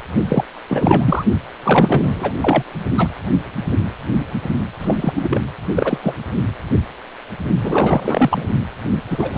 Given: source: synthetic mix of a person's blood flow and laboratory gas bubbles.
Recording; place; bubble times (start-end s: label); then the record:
Doppler ultrasound of blood flow; precordium
0.29-0.45 s: bubbles
0.68-1.25 s: bubbles
1.64-2.32 s: bubbles
2.42-2.63 s: bubbles
2.98-3.08 s: bubbles
4.78-5.12 s: bubbles
5.15-5.41 s: bubbles
5.75-5.98 s: bubbles
6.02-6.15 s: bubbles
7.60-8.46 s: bubbles
9.10-9.37 s: bubbles
From the record:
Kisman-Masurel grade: 333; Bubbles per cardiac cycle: rolling drumbeat, 9 or more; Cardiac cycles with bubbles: 50 to 99%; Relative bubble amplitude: loud (0.450 to 0.775); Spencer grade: 3 (all of the cardiac periods contain showers or single bubble signals, but not dominating or overriding the cardiac motion signals); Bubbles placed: only in the low amplitude regions of the cardiac cycle